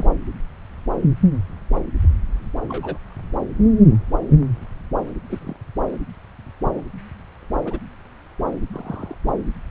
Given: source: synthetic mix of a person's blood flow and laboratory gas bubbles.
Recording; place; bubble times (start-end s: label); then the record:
Doppler ultrasound of blood flow; subclavian vein
0.00-0.04 s: bubbles
2.67-2.98 s: bubbles
5.30-5.39 s: bubbles
5.41-5.56 s: bubbles
7.66-7.79 s: bubbles
8.73-9.17 s: bubbles
From the record:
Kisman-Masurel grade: 121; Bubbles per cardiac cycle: 1 to 2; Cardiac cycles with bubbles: 10 to 50%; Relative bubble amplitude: barely perceptible (0.100 to 0.250); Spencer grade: 2 (many but less than half of the cardiac periods contain bubble signals, singularly or in groups); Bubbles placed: anywhere in the cardiac cycle